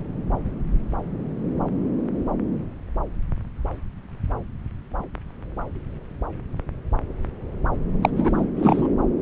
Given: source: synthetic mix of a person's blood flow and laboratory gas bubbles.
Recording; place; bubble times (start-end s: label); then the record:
Doppler ultrasound of blood flow; subclavian vein
8.02-8.10 s: bubbles
8.16-8.44 s: bubbles
8.56-8.89 s: bubbles
From the record:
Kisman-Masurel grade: 212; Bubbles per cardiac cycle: several, 3 to 8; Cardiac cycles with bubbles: 1 to 10%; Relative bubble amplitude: moderate (0.250 to 0.450); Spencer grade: 1 (occasional bubble signal discernible with the cardiac motion signal, with majority of cardiac periods free of bubbles); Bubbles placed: anywhere in the cardiac cycle